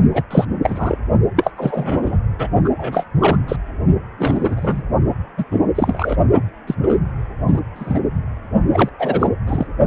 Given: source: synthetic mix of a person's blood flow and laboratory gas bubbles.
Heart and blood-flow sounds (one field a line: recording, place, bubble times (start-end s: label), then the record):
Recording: Doppler ultrasound of blood flow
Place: precordium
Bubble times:
0.13-0.23 s: bubbles
0.30-0.45 s: bubbles
0.63-0.98 s: bubbles
1.35-1.50 s: bubbles
1.57-2.20 s: bubbles
2.39-2.48 s: bubbles
2.65-3.04 s: bubbles
3.20-3.37 s: bubbles
3.48-3.56 s: bubbles
4.18-4.82 s: bubbles
5.38-5.45 s: bubbles
5.51-5.59 s: bubbles
5.75-6.16 s: bubbles
6.67-6.75 s: bubbles
6.82-6.98 s: bubbles
7.47-7.60 s: bubbles
7.75-8.00 s: bubbles
8.73-8.90 s: bubbles
8.99-9.29 s: bubbles
9.46-9.67 s: bubbles
From the record:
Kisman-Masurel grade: 243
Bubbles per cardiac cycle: several, 3 to 8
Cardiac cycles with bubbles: 100%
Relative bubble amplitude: loud (0.450 to 0.775)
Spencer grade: 3 (all of the cardiac periods contain showers or single bubble signals, but not dominating or overriding the cardiac motion signals)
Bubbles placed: only in the low amplitude regions of the cardiac cycle